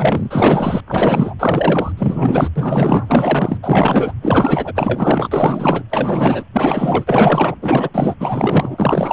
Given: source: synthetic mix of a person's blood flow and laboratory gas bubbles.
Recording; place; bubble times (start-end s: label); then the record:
Doppler ultrasound of blood flow; precordium
0.00-0.80 s: bubbles
0.88-1.34 s: bubbles
1.39-1.92 s: bubbles
1.97-2.49 s: bubbles
2.56-3.58 s: bubbles
3.62-4.14 s: bubbles
4.22-5.83 s: bubbles
5.90-6.45 s: bubbles
6.53-7.55 s: bubbles
7.61-7.90 s: bubbles
7.93-8.15 s: bubbles
8.19-9.13 s: bubbles
From the record:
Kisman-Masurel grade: 444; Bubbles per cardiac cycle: continuous sound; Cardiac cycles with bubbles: 100%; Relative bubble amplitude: maximal (0.775 to 0.999); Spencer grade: 4 (maximum detectable bubble signal sounding continuously throughout systole and diastole of every cardiac period, and overriding the amplitude of the normal cardiac signals); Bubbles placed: anywhere in the cardiac cycle